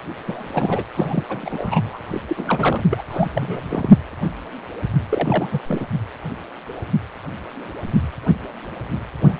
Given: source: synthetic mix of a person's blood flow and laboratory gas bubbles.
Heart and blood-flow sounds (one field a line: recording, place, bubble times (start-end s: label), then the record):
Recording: Doppler ultrasound of blood flow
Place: precordium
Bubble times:
0.26-0.83 s: bubbles
0.95-1.24 s: bubbles
1.29-1.99 s: bubbles
2.10-2.21 s: bubbles
2.29-2.83 s: bubbles
2.90-3.02 s: bubbles
3.09-3.29 s: bubbles
3.33-3.93 s: bubbles
5.09-5.62 s: bubbles
5.69-5.88 s: bubbles
9.26-9.38 s: bubbles
From the record:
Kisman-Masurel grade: 332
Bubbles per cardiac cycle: rolling drumbeat, 9 or more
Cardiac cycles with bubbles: 50 to 99%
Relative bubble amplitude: moderate (0.250 to 0.450)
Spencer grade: 3 (all of the cardiac periods contain showers or single bubble signals, but not dominating or overriding the cardiac motion signals)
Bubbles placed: anywhere in the cardiac cycle